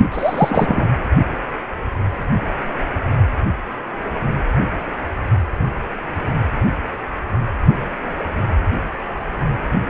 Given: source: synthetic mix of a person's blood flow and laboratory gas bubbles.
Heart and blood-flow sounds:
Doppler ultrasound of blood flow; precordium
0.00-0.07 s: bubbles
0.11-0.85 s: bubbles
From the record:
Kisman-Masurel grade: 213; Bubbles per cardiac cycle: several, 3 to 8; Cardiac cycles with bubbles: 1 to 10%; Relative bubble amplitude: loud (0.450 to 0.775); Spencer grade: 1 (occasional bubble signal discernible with the cardiac motion signal, with majority of cardiac periods free of bubbles); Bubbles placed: anywhere in the cardiac cycle

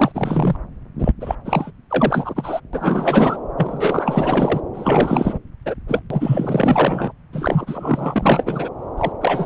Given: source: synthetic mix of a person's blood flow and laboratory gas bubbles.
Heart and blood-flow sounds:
Doppler ultrasound of blood flow; subclavian vein
0.00-0.56 s: bubbles
0.98-1.12 s: bubbles
1.20-1.35 s: bubbles
1.45-1.71 s: bubbles
1.90-2.60 s: bubbles
2.73-3.39 s: bubbles
3.56-4.61 s: bubbles
4.74-5.39 s: bubbles
5.65-5.75 s: bubbles
5.88-6.02 s: bubbles
6.10-7.12 s: bubbles
7.33-8.69 s: bubbles
8.97-9.12 s: bubbles
9.21-9.46 s: bubbles
From the record:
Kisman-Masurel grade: 444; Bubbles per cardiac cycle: continuous sound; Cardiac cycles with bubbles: 100%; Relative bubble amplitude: maximal (0.775 to 0.999); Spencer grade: 4 (maximum detectable bubble signal sounding continuously throughout systole and diastole of every cardiac period, and overriding the amplitude of the normal cardiac signals); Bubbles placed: anywhere in the cardiac cycle

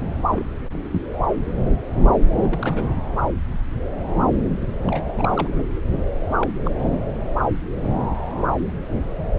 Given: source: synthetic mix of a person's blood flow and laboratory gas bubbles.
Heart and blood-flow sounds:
Doppler ultrasound of blood flow; subclavian vein
0.32-0.45 s: bubbles
0.92-1.02 s: bubbles
2.43-2.90 s: bubbles
4.62-4.67 s: bubbles
4.87-5.03 s: bubbles
5.17-5.63 s: bubbles
6.41-6.54 s: bubbles
6.65-6.71 s: bubbles
From the record:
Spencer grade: 2 (many but less than half of the cardiac periods contain bubble signals, singularly or in groups); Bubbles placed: anywhere in the cardiac cycle

